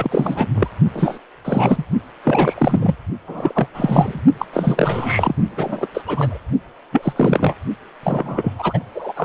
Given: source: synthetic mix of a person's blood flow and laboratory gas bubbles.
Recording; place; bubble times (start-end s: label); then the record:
Doppler ultrasound of blood flow; precordium
0.00-0.47 s: bubbles
0.54-0.68 s: bubbles
0.93-1.19 s: bubbles
1.44-1.83 s: bubbles
2.25-2.95 s: bubbles
3.27-3.67 s: bubbles
3.74-4.23 s: bubbles
4.38-4.46 s: bubbles
4.53-5.36 s: bubbles
5.50-5.87 s: bubbles
5.94-6.01 s: bubbles
6.05-6.38 s: bubbles
6.92-7.12 s: bubbles
7.16-7.54 s: bubbles
8.03-8.52 s: bubbles
8.58-8.80 s: bubbles
8.94-9.12 s: bubbles
9.16-9.25 s: bubbles
From the record:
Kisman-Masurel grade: 343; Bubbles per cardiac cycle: rolling drumbeat, 9 or more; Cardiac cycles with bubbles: 100%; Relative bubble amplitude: loud (0.450 to 0.775); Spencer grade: 3 (all of the cardiac periods contain showers or single bubble signals, but not dominating or overriding the cardiac motion signals); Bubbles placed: only in the low amplitude regions of the cardiac cycle